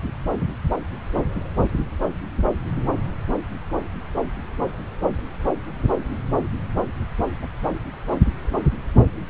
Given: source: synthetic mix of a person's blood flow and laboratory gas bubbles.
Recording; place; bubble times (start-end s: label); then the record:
Doppler ultrasound of blood flow; subclavian vein
7.42-7.46 s: bubbles
From the record:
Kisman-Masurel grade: 111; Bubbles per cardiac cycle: 1 to 2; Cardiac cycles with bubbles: 1 to 10%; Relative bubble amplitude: barely perceptible (0.100 to 0.250); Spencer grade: 1 (occasional bubble signal discernible with the cardiac motion signal, with majority of cardiac periods free of bubbles); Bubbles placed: anywhere in the cardiac cycle